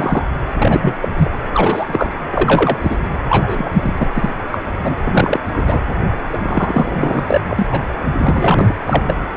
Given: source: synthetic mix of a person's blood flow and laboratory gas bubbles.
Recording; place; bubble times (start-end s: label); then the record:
Doppler ultrasound of blood flow; precordium
0.00-0.25 s: bubbles
0.58-0.94 s: bubbles
1.02-1.08 s: bubbles
1.17-1.30 s: bubbles
1.53-2.12 s: bubbles
2.33-2.77 s: bubbles
2.81-2.96 s: bubbles
3.29-3.94 s: bubbles
3.98-4.11 s: bubbles
4.15-4.29 s: bubbles
4.52-4.58 s: bubbles
4.82-4.96 s: bubbles
5.04-5.39 s: bubbles
5.51-5.80 s: bubbles
6.33-7.20 s: bubbles
7.27-7.41 s: bubbles
7.47-7.94 s: bubbles
8.23-8.73 s: bubbles
8.87-9.02 s: bubbles
9.07-9.16 s: bubbles
9.34-9.37 s: bubbles
From the record:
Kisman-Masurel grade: 243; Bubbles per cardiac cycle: several, 3 to 8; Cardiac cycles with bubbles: 100%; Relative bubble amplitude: loud (0.450 to 0.775); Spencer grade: 3 (all of the cardiac periods contain showers or single bubble signals, but not dominating or overriding the cardiac motion signals); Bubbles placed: anywhere in the cardiac cycle